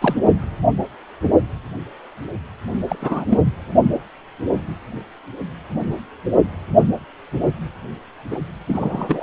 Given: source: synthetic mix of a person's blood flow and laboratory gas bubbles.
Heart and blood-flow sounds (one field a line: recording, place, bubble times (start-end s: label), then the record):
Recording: Doppler ultrasound of blood flow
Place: precordium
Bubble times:
0.00-0.15 s: bubbles
2.88-2.96 s: bubbles
3.01-3.25 s: bubbles
3.29-3.40 s: bubbles
8.31-8.40 s: bubbles
8.67-9.23 s: bubbles
From the record:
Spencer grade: 2 (many but less than half of the cardiac periods contain bubble signals, singularly or in groups)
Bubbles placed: only in the low amplitude regions of the cardiac cycle